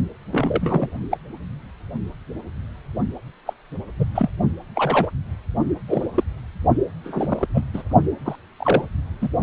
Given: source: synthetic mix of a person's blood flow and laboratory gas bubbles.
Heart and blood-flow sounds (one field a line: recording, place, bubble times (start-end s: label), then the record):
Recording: Doppler ultrasound of blood flow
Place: precordium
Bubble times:
0.32-0.89 s: bubbles
1.10-1.18 s: bubbles
3.46-3.54 s: bubbles
4.00-4.04 s: bubbles
4.15-4.29 s: bubbles
4.75-5.11 s: bubbles
5.88-6.06 s: bubbles
6.15-6.24 s: bubbles
7.04-7.49 s: bubbles
7.54-7.64 s: bubbles
7.73-7.82 s: bubbles
8.25-8.36 s: bubbles
8.59-8.85 s: bubbles
9.21-9.29 s: bubbles
From the record:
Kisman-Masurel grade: 232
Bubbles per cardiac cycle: several, 3 to 8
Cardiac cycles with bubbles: 50 to 99%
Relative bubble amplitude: moderate (0.250 to 0.450)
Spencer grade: 3 (all of the cardiac periods contain showers or single bubble signals, but not dominating or overriding the cardiac motion signals)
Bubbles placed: only in the low amplitude regions of the cardiac cycle